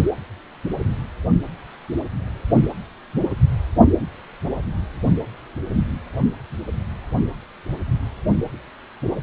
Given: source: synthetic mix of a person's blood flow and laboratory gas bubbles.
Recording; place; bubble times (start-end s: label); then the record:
Doppler ultrasound of blood flow; precordium
3.13-3.23 s: bubbles
From the record:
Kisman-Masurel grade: 112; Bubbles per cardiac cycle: 1 to 2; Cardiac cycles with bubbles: 1 to 10%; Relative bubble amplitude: moderate (0.250 to 0.450); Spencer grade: 1 (occasional bubble signal discernible with the cardiac motion signal, with majority of cardiac periods free of bubbles); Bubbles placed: only in the low amplitude regions of the cardiac cycle